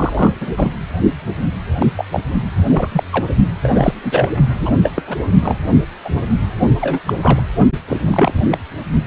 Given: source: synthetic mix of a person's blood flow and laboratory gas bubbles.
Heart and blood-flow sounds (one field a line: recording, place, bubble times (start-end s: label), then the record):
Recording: Doppler ultrasound of blood flow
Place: precordium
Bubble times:
0.00-0.31 s: bubbles
0.39-0.51 s: bubbles
0.56-0.74 s: bubbles
1.79-1.86 s: bubbles
1.96-2.05 s: bubbles
2.12-2.21 s: bubbles
2.67-3.04 s: bubbles
3.10-3.24 s: bubbles
3.63-3.93 s: bubbles
4.03-4.28 s: bubbles
4.59-4.71 s: bubbles
4.83-4.92 s: bubbles
4.96-5.02 s: bubbles
5.07-5.15 s: bubbles
5.41-5.55 s: bubbles
6.04-6.09 s: bubbles
6.81-7.00 s: bubbles
7.06-7.13 s: bubbles
7.22-7.42 s: bubbles
7.87-7.97 s: bubbles
8.05-8.58 s: bubbles
From the record:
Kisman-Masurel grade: 233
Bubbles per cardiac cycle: several, 3 to 8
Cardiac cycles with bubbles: 50 to 99%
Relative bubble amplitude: loud (0.450 to 0.775)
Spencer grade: 3 (all of the cardiac periods contain showers or single bubble signals, but not dominating or overriding the cardiac motion signals)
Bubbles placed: only in the low amplitude regions of the cardiac cycle